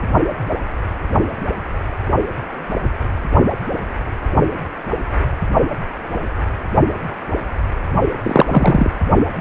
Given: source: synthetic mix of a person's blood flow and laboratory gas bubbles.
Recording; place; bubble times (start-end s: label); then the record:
Doppler ultrasound of blood flow; precordium
8.23-8.90 s: bubbles
From the record:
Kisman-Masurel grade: 213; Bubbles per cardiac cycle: several, 3 to 8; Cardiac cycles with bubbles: 1 to 10%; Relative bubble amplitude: loud (0.450 to 0.775); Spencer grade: 1 (occasional bubble signal discernible with the cardiac motion signal, with majority of cardiac periods free of bubbles); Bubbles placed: only in the low amplitude regions of the cardiac cycle